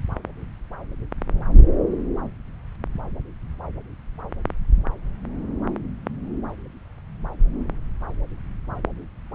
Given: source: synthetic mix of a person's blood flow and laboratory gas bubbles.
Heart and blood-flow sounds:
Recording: Doppler ultrasound of blood flow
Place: subclavian vein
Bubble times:
no bubbles
From the record:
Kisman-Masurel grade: 000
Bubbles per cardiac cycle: 0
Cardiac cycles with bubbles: 0%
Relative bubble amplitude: no bubbles discernible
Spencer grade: 0 (complete lack of bubble signals)

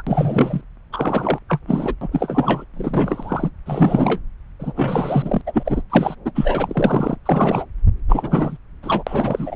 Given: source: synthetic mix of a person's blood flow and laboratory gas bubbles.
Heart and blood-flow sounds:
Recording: Doppler ultrasound of blood flow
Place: subclavian vein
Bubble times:
0.00-0.02 s: bubbles
0.07-0.61 s: bubbles
0.92-1.39 s: bubbles
1.48-1.59 s: bubbles
1.67-1.95 s: bubbles
2.01-2.08 s: bubbles
2.12-2.65 s: bubbles
2.74-3.50 s: bubbles
3.66-4.19 s: bubbles
4.59-5.42 s: bubbles
5.46-5.82 s: bubbles
5.89-6.15 s: bubbles
6.25-6.31 s: bubbles
6.35-7.17 s: bubbles
7.25-7.67 s: bubbles
8.08-8.57 s: bubbles
8.82-9.03 s: bubbles
9.06-9.56 s: bubbles
From the record:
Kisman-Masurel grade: 343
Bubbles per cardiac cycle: rolling drumbeat, 9 or more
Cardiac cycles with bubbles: 100%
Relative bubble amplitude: loud (0.450 to 0.775)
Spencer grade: 3 (all of the cardiac periods contain showers or single bubble signals, but not dominating or overriding the cardiac motion signals)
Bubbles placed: anywhere in the cardiac cycle

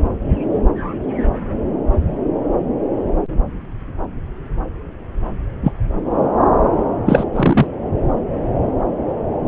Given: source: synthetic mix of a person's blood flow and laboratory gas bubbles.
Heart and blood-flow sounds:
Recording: Doppler ultrasound of blood flow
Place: subclavian vein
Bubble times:
5.63-5.72 s: bubbles
7.06-7.25 s: bubbles
7.33-7.67 s: bubbles
From the record:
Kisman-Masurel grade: 123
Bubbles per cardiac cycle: 1 to 2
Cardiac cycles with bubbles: 10 to 50%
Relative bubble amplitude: loud (0.450 to 0.775)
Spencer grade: 2 (many but less than half of the cardiac periods contain bubble signals, singularly or in groups)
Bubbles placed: anywhere in the cardiac cycle

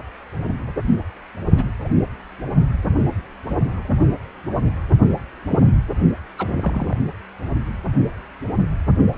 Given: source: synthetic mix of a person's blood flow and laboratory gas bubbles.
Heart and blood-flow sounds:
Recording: Doppler ultrasound of blood flow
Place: precordium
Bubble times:
1.55-1.71 s: bubbles
1.84-1.88 s: bubbles
5.49-5.59 s: bubbles
5.66-5.74 s: bubbles
6.38-6.95 s: bubbles
From the record:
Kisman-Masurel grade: 121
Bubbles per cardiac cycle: 1 to 2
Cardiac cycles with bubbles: 10 to 50%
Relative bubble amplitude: barely perceptible (0.100 to 0.250)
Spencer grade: 2 (many but less than half of the cardiac periods contain bubble signals, singularly or in groups)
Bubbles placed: only in the low amplitude regions of the cardiac cycle

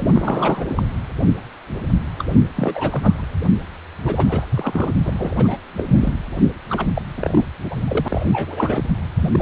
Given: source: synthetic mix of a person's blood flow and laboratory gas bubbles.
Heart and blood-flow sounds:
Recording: Doppler ultrasound of blood flow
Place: precordium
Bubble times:
0.00-0.91 s: bubbles
2.19-2.25 s: bubbles
2.35-2.39 s: bubbles
2.56-3.25 s: bubbles
4.05-4.46 s: bubbles
4.51-4.92 s: bubbles
5.03-5.13 s: bubbles
5.18-5.32 s: bubbles
5.36-5.57 s: bubbles
5.69-5.84 s: bubbles
5.88-6.14 s: bubbles
6.69-6.85 s: bubbles
6.94-7.02 s: bubbles
7.17-7.43 s: bubbles
7.70-7.77 s: bubbles
7.88-8.84 s: bubbles
9.21-9.42 s: bubbles
From the record:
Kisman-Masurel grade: 332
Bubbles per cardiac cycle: rolling drumbeat, 9 or more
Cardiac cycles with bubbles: 50 to 99%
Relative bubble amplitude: moderate (0.250 to 0.450)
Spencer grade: 3 (all of the cardiac periods contain showers or single bubble signals, but not dominating or overriding the cardiac motion signals)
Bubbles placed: anywhere in the cardiac cycle

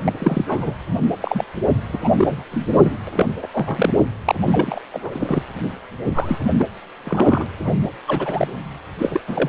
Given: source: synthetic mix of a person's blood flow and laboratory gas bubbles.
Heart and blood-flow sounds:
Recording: Doppler ultrasound of blood flow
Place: precordium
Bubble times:
0.04-0.12 s: bubbles
0.20-0.75 s: bubbles
1.21-1.45 s: bubbles
1.93-1.98 s: bubbles
2.03-2.12 s: bubbles
2.17-2.43 s: bubbles
2.51-2.97 s: bubbles
3.07-3.26 s: bubbles
3.42-3.48 s: bubbles
3.52-3.89 s: bubbles
4.25-4.35 s: bubbles
4.40-4.80 s: bubbles
4.93-5.42 s: bubbles
6.04-6.39 s: bubbles
6.58-6.67 s: bubbles
7.04-7.46 s: bubbles
7.64-7.80 s: bubbles
8.07-8.48 s: bubbles
8.98-9.21 s: bubbles
9.27-9.49 s: bubbles
From the record:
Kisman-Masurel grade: 242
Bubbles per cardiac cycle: several, 3 to 8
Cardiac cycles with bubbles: 100%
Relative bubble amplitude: moderate (0.250 to 0.450)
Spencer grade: 3 (all of the cardiac periods contain showers or single bubble signals, but not dominating or overriding the cardiac motion signals)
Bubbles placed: anywhere in the cardiac cycle

